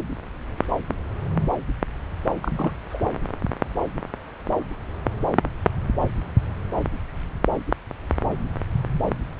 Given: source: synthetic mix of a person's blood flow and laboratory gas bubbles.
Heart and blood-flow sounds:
Doppler ultrasound of blood flow; subclavian vein
2.42-2.76 s: bubbles
2.90-3.01 s: bubbles
From the record:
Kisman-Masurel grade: 211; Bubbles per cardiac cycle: several, 3 to 8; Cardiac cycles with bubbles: 1 to 10%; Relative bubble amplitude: barely perceptible (0.100 to 0.250); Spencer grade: 1 (occasional bubble signal discernible with the cardiac motion signal, with majority of cardiac periods free of bubbles); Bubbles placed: anywhere in the cardiac cycle

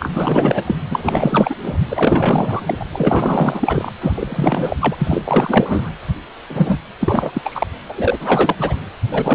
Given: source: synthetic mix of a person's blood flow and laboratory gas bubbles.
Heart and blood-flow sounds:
Doppler ultrasound of blood flow; precordium
0.00-0.75 s: bubbles
0.91-1.55 s: bubbles
1.63-1.78 s: bubbles
1.88-2.77 s: bubbles
2.79-2.85 s: bubbles
2.92-3.92 s: bubbles
4.00-4.76 s: bubbles
4.80-4.95 s: bubbles
4.98-5.91 s: bubbles
6.50-6.79 s: bubbles
7.00-7.66 s: bubbles
7.88-8.77 s: bubbles
9.12-9.35 s: bubbles
From the record:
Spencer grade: 4 (maximum detectable bubble signal sounding continuously throughout systole and diastole of every cardiac period, and overriding the amplitude of the normal cardiac signals); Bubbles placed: anywhere in the cardiac cycle

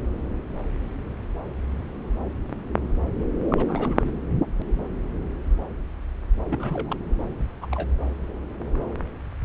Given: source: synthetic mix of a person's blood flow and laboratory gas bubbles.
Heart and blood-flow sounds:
Doppler ultrasound of blood flow; subclavian vein
3.49-4.11 s: bubbles
6.49-6.96 s: bubbles
7.29-7.33 s: bubbles
7.61-7.66 s: bubbles
7.72-7.88 s: bubbles
From the record:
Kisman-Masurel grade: 222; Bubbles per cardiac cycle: several, 3 to 8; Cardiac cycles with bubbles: 10 to 50%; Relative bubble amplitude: moderate (0.250 to 0.450); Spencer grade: 2 (many but less than half of the cardiac periods contain bubble signals, singularly or in groups); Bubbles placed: anywhere in the cardiac cycle

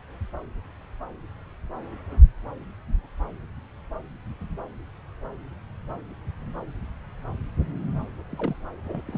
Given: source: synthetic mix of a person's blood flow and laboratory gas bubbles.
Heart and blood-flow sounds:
Doppler ultrasound of blood flow; subclavian vein
8.30-8.55 s: bubbles
8.85-9.02 s: bubbles
9.05-9.17 s: bubbles
From the record:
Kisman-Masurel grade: 221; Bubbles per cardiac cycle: several, 3 to 8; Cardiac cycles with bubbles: 10 to 50%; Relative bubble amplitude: barely perceptible (0.100 to 0.250); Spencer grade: 2 (many but less than half of the cardiac periods contain bubble signals, singularly or in groups); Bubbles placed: anywhere in the cardiac cycle

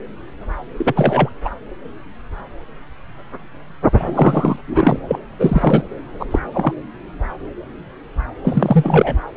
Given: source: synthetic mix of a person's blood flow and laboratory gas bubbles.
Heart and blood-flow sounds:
Doppler ultrasound of blood flow; subclavian vein
0.77-0.93 s: bubbles
0.96-1.29 s: bubbles
1.45-1.49 s: bubbles
3.93-4.57 s: bubbles
4.67-5.00 s: bubbles
5.08-5.20 s: bubbles
5.39-5.83 s: bubbles
6.19-6.26 s: bubbles
6.30-6.39 s: bubbles
6.53-6.74 s: bubbles
8.45-9.17 s: bubbles
From the record:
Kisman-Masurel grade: 223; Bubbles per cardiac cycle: several, 3 to 8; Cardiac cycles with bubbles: 10 to 50%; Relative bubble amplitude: loud (0.450 to 0.775); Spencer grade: 2 (many but less than half of the cardiac periods contain bubble signals, singularly or in groups); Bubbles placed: anywhere in the cardiac cycle

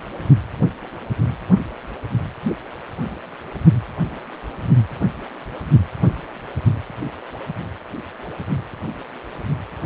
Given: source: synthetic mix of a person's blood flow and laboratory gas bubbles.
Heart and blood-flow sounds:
Doppler ultrasound of blood flow; precordium
no bubbles
From the record:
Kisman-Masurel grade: 000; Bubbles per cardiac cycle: 0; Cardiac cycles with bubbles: 0%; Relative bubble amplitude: no bubbles discernible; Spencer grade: 0 (complete lack of bubble signals)

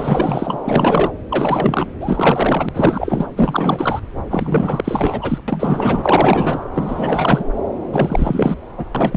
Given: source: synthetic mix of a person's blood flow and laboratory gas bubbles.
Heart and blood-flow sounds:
Doppler ultrasound of blood flow; subclavian vein
0.00-0.59 s: bubbles
0.64-1.10 s: bubbles
1.29-1.88 s: bubbles
2.00-2.69 s: bubbles
2.74-3.27 s: bubbles
3.36-4.00 s: bubbles
4.30-5.38 s: bubbles
5.47-6.63 s: bubbles
6.74-7.44 s: bubbles
7.92-8.57 s: bubbles
8.78-8.86 s: bubbles
8.95-9.17 s: bubbles
From the record:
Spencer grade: 4 (maximum detectable bubble signal sounding continuously throughout systole and diastole of every cardiac period, and overriding the amplitude of the normal cardiac signals); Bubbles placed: anywhere in the cardiac cycle

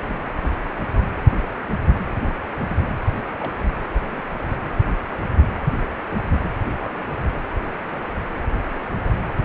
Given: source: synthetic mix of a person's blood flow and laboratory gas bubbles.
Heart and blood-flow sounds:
Doppler ultrasound of blood flow; precordium
0.08-0.21 s: bubbles
2.16-2.27 s: bubbles
2.67-2.77 s: bubbles
3.00-3.10 s: bubbles
3.40-3.52 s: bubbles
3.92-4.22 s: bubbles
6.67-6.94 s: bubbles
From the record:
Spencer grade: 2 (many but less than half of the cardiac periods contain bubble signals, singularly or in groups); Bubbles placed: anywhere in the cardiac cycle

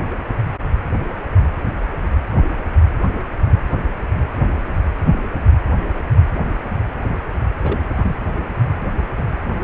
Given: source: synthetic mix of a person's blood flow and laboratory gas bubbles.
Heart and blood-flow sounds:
Doppler ultrasound of blood flow; precordium
7.63-7.80 s: bubbles
7.92-8.16 s: bubbles
From the record:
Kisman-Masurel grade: 211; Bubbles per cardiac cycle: several, 3 to 8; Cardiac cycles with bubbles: 1 to 10%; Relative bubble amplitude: barely perceptible (0.100 to 0.250); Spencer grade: 1 (occasional bubble signal discernible with the cardiac motion signal, with majority of cardiac periods free of bubbles); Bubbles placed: anywhere in the cardiac cycle

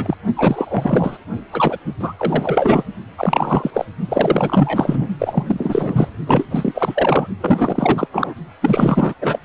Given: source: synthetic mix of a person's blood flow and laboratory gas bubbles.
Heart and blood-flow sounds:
Doppler ultrasound of blood flow; precordium
0.00-0.16 s: bubbles
0.36-1.18 s: bubbles
1.52-1.78 s: bubbles
1.99-2.13 s: bubbles
2.17-2.83 s: bubbles
3.17-3.85 s: bubbles
4.08-5.08 s: bubbles
5.19-6.08 s: bubbles
6.27-6.46 s: bubbles
6.50-7.28 s: bubbles
7.40-8.08 s: bubbles
8.12-8.34 s: bubbles
8.62-9.14 s: bubbles
9.21-9.39 s: bubbles
From the record:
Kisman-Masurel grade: 444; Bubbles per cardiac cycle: continuous sound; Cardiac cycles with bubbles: 100%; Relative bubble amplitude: maximal (0.775 to 0.999); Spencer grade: 4 (maximum detectable bubble signal sounding continuously throughout systole and diastole of every cardiac period, and overriding the amplitude of the normal cardiac signals); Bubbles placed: only in the low amplitude regions of the cardiac cycle

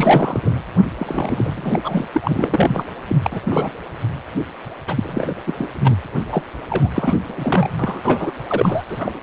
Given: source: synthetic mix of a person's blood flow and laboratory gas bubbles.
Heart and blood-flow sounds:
Doppler ultrasound of blood flow; precordium
0.00-0.59 s: bubbles
0.99-1.79 s: bubbles
1.83-2.05 s: bubbles
2.14-2.87 s: bubbles
3.08-3.16 s: bubbles
3.23-3.40 s: bubbles
3.42-3.71 s: bubbles
4.87-5.34 s: bubbles
5.46-5.54 s: bubbles
5.58-5.69 s: bubbles
5.84-5.96 s: bubbles
6.32-6.42 s: bubbles
6.67-6.90 s: bubbles
6.95-7.14 s: bubbles
7.28-7.70 s: bubbles
7.79-8.32 s: bubbles
8.47-8.83 s: bubbles
8.88-9.20 s: bubbles
From the record:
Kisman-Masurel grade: 332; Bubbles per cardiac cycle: rolling drumbeat, 9 or more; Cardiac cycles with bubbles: 50 to 99%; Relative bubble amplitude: moderate (0.250 to 0.450); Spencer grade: 3 (all of the cardiac periods contain showers or single bubble signals, but not dominating or overriding the cardiac motion signals); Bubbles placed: anywhere in the cardiac cycle

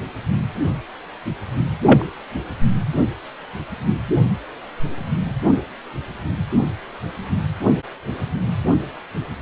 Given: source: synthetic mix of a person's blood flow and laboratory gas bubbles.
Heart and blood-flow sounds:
Doppler ultrasound of blood flow; precordium
1.86-2.04 s: bubbles
From the record:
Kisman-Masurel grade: 113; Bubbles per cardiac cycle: 1 to 2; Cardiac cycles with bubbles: 1 to 10%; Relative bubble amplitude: loud (0.450 to 0.775); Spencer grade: 1 (occasional bubble signal discernible with the cardiac motion signal, with majority of cardiac periods free of bubbles); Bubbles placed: anywhere in the cardiac cycle

